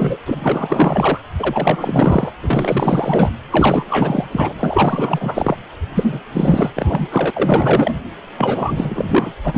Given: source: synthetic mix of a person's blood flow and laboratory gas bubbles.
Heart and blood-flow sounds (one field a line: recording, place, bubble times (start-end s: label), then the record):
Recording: Doppler ultrasound of blood flow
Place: precordium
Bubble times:
0.00-0.18 s: bubbles
0.26-1.18 s: bubbles
1.39-2.31 s: bubbles
2.41-3.31 s: bubbles
3.50-4.25 s: bubbles
4.31-4.53 s: bubbles
4.59-5.57 s: bubbles
5.96-6.21 s: bubbles
6.32-6.70 s: bubbles
6.75-7.07 s: bubbles
7.10-7.30 s: bubbles
7.33-7.95 s: bubbles
8.37-9.33 s: bubbles
9.43-9.58 s: bubbles
From the record:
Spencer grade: 4 (maximum detectable bubble signal sounding continuously throughout systole and diastole of every cardiac period, and overriding the amplitude of the normal cardiac signals)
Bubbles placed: anywhere in the cardiac cycle